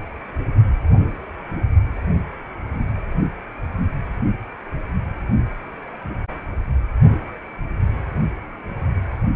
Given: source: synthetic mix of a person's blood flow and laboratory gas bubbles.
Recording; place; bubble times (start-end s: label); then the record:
Doppler ultrasound of blood flow; precordium
no bubbles
From the record:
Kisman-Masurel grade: 000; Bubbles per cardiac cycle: 0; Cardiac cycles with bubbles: 0%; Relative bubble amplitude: no bubbles discernible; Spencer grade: 0 (complete lack of bubble signals)